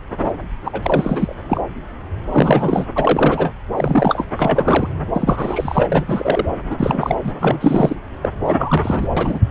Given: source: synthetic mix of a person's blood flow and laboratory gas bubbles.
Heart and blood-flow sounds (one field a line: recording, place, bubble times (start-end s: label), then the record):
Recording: Doppler ultrasound of blood flow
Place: subclavian vein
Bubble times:
0.65-1.34 s: bubbles
1.48-1.60 s: bubbles
2.32-2.86 s: bubbles
2.95-3.53 s: bubbles
3.77-4.25 s: bubbles
4.39-4.88 s: bubbles
5.14-5.89 s: bubbles
5.92-6.46 s: bubbles
6.70-7.19 s: bubbles
7.22-7.33 s: bubbles
7.40-7.96 s: bubbles
8.21-8.29 s: bubbles
8.45-9.08 s: bubbles
9.17-9.39 s: bubbles
From the record:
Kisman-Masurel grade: 333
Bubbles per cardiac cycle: rolling drumbeat, 9 or more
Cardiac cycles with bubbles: 50 to 99%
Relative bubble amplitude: loud (0.450 to 0.775)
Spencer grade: 3 (all of the cardiac periods contain showers or single bubble signals, but not dominating or overriding the cardiac motion signals)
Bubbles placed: anywhere in the cardiac cycle